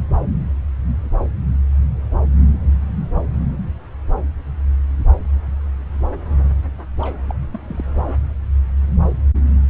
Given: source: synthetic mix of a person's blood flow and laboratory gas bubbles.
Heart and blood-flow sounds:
Doppler ultrasound of blood flow; subclavian vein
6.99-7.18 s: bubbles
7.27-7.35 s: bubbles
7.52-7.59 s: bubbles
7.67-7.85 s: bubbles
From the record:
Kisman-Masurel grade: 211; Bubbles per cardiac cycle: several, 3 to 8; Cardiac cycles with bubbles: 1 to 10%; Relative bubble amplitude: barely perceptible (0.100 to 0.250); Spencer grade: 1 (occasional bubble signal discernible with the cardiac motion signal, with majority of cardiac periods free of bubbles); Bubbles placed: anywhere in the cardiac cycle

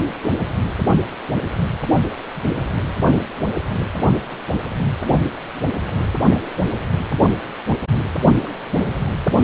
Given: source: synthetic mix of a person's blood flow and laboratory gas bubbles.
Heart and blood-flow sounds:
Doppler ultrasound of blood flow; precordium
2.35-2.42 s: bubbles
2.73-2.83 s: bubbles
7.73-7.76 s: bubbles
8.34-8.80 s: bubbles
9.28-9.44 s: bubbles
From the record:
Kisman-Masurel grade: 121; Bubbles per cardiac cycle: 1 to 2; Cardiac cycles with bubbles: 10 to 50%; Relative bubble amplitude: barely perceptible (0.100 to 0.250); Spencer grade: 2 (many but less than half of the cardiac periods contain bubble signals, singularly or in groups); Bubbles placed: anywhere in the cardiac cycle

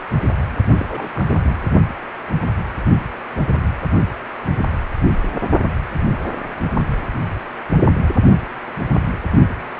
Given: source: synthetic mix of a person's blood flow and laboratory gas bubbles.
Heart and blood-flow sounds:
Doppler ultrasound of blood flow; precordium
0.76-1.60 s: bubbles
From the record:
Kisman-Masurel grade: 211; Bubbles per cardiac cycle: several, 3 to 8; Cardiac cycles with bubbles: 1 to 10%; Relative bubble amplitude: barely perceptible (0.100 to 0.250); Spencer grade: 1 (occasional bubble signal discernible with the cardiac motion signal, with majority of cardiac periods free of bubbles); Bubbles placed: only in the low amplitude regions of the cardiac cycle

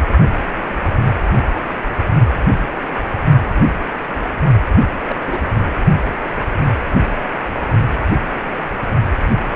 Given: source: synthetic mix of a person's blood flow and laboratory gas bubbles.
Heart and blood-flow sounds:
Doppler ultrasound of blood flow; precordium
5.08-5.16 s: bubbles
5.26-5.39 s: bubbles
From the record:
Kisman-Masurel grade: 121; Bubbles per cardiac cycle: 1 to 2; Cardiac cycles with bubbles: 10 to 50%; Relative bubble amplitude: barely perceptible (0.100 to 0.250); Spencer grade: 2 (many but less than half of the cardiac periods contain bubble signals, singularly or in groups); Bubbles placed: only in the low amplitude regions of the cardiac cycle

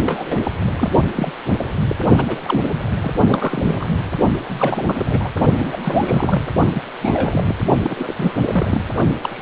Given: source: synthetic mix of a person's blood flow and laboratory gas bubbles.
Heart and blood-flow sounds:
Doppler ultrasound of blood flow; precordium
0.06-0.41 s: bubbles
0.43-0.51 s: bubbles
0.62-0.91 s: bubbles
0.95-1.04 s: bubbles
1.15-1.33 s: bubbles
1.58-1.70 s: bubbles
1.89-1.95 s: bubbles
2.17-2.40 s: bubbles
2.43-2.62 s: bubbles
3.02-3.12 s: bubbles
3.26-3.88 s: bubbles
4.47-5.30 s: bubbles
5.58-5.78 s: bubbles
5.83-6.42 s: bubbles
6.72-6.82 s: bubbles
7.01-7.54 s: bubbles
7.83-8.34 s: bubbles
8.46-8.79 s: bubbles
9.21-9.42 s: bubbles
From the record:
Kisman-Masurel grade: 342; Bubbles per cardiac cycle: rolling drumbeat, 9 or more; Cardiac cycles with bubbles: 100%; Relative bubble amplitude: moderate (0.250 to 0.450); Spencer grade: 3 (all of the cardiac periods contain showers or single bubble signals, but not dominating or overriding the cardiac motion signals); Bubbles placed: only in the low amplitude regions of the cardiac cycle

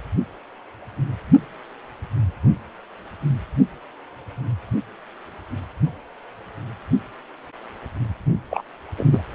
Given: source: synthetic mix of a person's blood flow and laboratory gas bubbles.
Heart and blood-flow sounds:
Doppler ultrasound of blood flow; precordium
8.50-8.64 s: bubbles
8.98-9.04 s: bubbles
9.11-9.21 s: bubbles
From the record:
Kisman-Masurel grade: 212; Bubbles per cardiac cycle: several, 3 to 8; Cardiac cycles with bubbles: 1 to 10%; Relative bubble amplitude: moderate (0.250 to 0.450); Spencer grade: 1 (occasional bubble signal discernible with the cardiac motion signal, with majority of cardiac periods free of bubbles); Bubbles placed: only in the low amplitude regions of the cardiac cycle

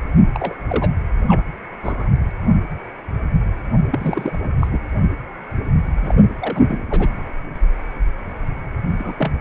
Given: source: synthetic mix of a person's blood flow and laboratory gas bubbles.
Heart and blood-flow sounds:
Doppler ultrasound of blood flow; precordium
0.34-0.55 s: bubbles
0.68-0.89 s: bubbles
1.28-1.42 s: bubbles
1.83-2.08 s: bubbles
3.91-4.38 s: bubbles
4.43-4.50 s: bubbles
4.60-4.67 s: bubbles
4.70-4.80 s: bubbles
6.02-6.15 s: bubbles
6.40-6.62 s: bubbles
6.68-7.10 s: bubbles
8.98-9.31 s: bubbles
From the record:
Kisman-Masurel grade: 232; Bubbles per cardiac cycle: several, 3 to 8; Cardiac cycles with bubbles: 50 to 99%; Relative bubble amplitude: moderate (0.250 to 0.450); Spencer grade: 3 (all of the cardiac periods contain showers or single bubble signals, but not dominating or overriding the cardiac motion signals); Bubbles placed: anywhere in the cardiac cycle

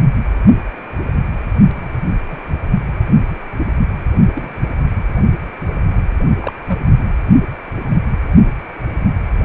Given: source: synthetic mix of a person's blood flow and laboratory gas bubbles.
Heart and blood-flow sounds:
Doppler ultrasound of blood flow; precordium
2.30-2.37 s: bubbles
4.26-4.58 s: bubbles
6.41-6.53 s: bubbles
6.66-6.79 s: bubbles
From the record:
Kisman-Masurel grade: 121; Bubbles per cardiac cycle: 1 to 2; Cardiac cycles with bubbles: 10 to 50%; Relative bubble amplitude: barely perceptible (0.100 to 0.250); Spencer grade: 2 (many but less than half of the cardiac periods contain bubble signals, singularly or in groups); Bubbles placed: anywhere in the cardiac cycle

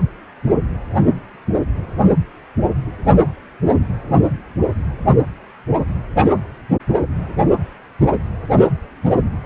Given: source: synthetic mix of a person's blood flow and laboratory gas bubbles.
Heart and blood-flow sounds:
Doppler ultrasound of blood flow; precordium
no bubbles
From the record:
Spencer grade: 0 (complete lack of bubble signals)

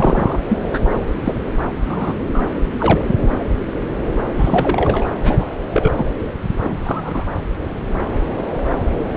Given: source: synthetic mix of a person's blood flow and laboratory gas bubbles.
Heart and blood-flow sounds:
Doppler ultrasound of blood flow; subclavian vein
0.00-0.40 s: bubbles
0.49-0.57 s: bubbles
0.71-0.80 s: bubbles
1.24-1.34 s: bubbles
1.86-2.15 s: bubbles
2.33-2.42 s: bubbles
2.81-3.04 s: bubbles
3.06-3.15 s: bubbles
4.38-5.07 s: bubbles
5.23-5.46 s: bubbles
5.71-5.94 s: bubbles
5.96-6.06 s: bubbles
6.52-6.76 s: bubbles
6.85-7.24 s: bubbles
From the record:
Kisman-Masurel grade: 232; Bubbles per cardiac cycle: several, 3 to 8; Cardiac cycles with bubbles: 50 to 99%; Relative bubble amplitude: moderate (0.250 to 0.450); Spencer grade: 3 (all of the cardiac periods contain showers or single bubble signals, but not dominating or overriding the cardiac motion signals); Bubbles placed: anywhere in the cardiac cycle

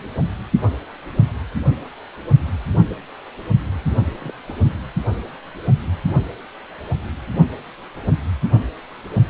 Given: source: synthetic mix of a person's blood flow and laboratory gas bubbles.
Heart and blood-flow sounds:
Doppler ultrasound of blood flow; precordium
3.74-3.94 s: bubbles
4.14-4.34 s: bubbles
4.46-4.57 s: bubbles
From the record:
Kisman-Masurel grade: 221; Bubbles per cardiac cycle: several, 3 to 8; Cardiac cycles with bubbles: 10 to 50%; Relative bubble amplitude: barely perceptible (0.100 to 0.250); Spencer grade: 2 (many but less than half of the cardiac periods contain bubble signals, singularly or in groups); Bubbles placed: only in the low amplitude regions of the cardiac cycle

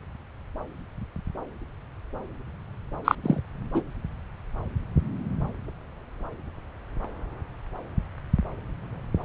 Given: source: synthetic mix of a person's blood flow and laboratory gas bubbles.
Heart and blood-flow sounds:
Doppler ultrasound of blood flow; subclavian vein
3.04-3.15 s: bubbles
3.23-3.40 s: bubbles
3.74-3.82 s: bubbles
From the record:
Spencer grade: 1 (occasional bubble signal discernible with the cardiac motion signal, with majority of cardiac periods free of bubbles); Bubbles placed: anywhere in the cardiac cycle

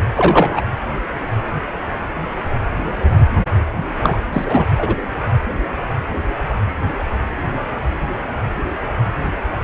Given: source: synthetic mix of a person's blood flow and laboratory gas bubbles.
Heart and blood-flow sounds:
Doppler ultrasound of blood flow; precordium
0.15-0.61 s: bubbles
4.02-4.19 s: bubbles
4.33-4.68 s: bubbles
4.77-4.95 s: bubbles
From the record:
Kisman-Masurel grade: 223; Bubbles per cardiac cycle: several, 3 to 8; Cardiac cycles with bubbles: 10 to 50%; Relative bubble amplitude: loud (0.450 to 0.775); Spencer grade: 2 (many but less than half of the cardiac periods contain bubble signals, singularly or in groups); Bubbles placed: anywhere in the cardiac cycle

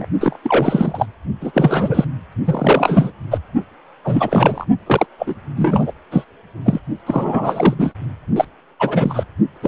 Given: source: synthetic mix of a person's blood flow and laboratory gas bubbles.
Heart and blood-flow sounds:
Doppler ultrasound of blood flow; precordium
0.00-0.06 s: bubbles
0.20-0.38 s: bubbles
0.43-1.06 s: bubbles
1.41-1.51 s: bubbles
1.54-2.04 s: bubbles
2.45-3.12 s: bubbles
3.30-3.38 s: bubbles
4.04-4.65 s: bubbles
4.86-5.07 s: bubbles
5.19-5.35 s: bubbles
5.57-5.92 s: bubbles
6.11-6.25 s: bubbles
6.65-6.79 s: bubbles
7.07-7.74 s: bubbles
7.79-7.94 s: bubbles
8.36-8.45 s: bubbles
8.79-9.23 s: bubbles
9.62-9.68 s: bubbles
From the record:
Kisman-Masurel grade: 343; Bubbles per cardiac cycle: rolling drumbeat, 9 or more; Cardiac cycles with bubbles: 100%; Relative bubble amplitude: loud (0.450 to 0.775); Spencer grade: 3 (all of the cardiac periods contain showers or single bubble signals, but not dominating or overriding the cardiac motion signals); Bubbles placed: only in the low amplitude regions of the cardiac cycle

